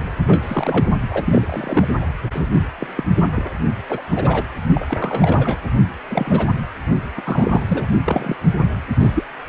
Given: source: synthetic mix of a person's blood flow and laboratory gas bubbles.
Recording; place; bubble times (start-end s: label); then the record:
Doppler ultrasound of blood flow; precordium
0.27-0.86 s: bubbles
1.10-1.88 s: bubbles
2.32-2.50 s: bubbles
2.78-2.87 s: bubbles
2.95-3.03 s: bubbles
3.32-3.47 s: bubbles
3.88-4.02 s: bubbles
4.07-4.43 s: bubbles
4.74-5.66 s: bubbles
6.10-6.50 s: bubbles
7.17-7.21 s: bubbles
7.24-7.63 s: bubbles
7.68-7.87 s: bubbles
8.05-8.36 s: bubbles
9.00-9.11 s: bubbles
9.13-9.24 s: bubbles
From the record:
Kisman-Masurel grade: 242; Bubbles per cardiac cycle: several, 3 to 8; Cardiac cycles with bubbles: 100%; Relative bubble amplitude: moderate (0.250 to 0.450); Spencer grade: 3 (all of the cardiac periods contain showers or single bubble signals, but not dominating or overriding the cardiac motion signals); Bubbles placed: only in the low amplitude regions of the cardiac cycle